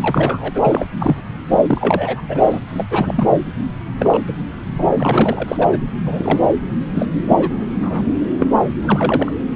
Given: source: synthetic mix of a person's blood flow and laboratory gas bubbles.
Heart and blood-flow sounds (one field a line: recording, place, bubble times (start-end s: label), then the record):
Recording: Doppler ultrasound of blood flow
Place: subclavian vein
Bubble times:
0.00-0.50 s: bubbles
0.55-0.86 s: bubbles
0.99-1.22 s: bubbles
1.50-2.21 s: bubbles
2.28-2.60 s: bubbles
2.69-2.84 s: bubbles
2.90-3.43 s: bubbles
3.99-4.18 s: bubbles
4.27-4.32 s: bubbles
4.78-4.85 s: bubbles
4.90-5.77 s: bubbles
6.06-6.47 s: bubbles
6.95-7.07 s: bubbles
7.29-7.65 s: bubbles
7.81-8.03 s: bubbles
8.39-8.55 s: bubbles
8.83-9.31 s: bubbles
From the record:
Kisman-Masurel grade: 242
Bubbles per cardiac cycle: several, 3 to 8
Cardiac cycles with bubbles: 100%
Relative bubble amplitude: moderate (0.250 to 0.450)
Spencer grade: 3 (all of the cardiac periods contain showers or single bubble signals, but not dominating or overriding the cardiac motion signals)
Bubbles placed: anywhere in the cardiac cycle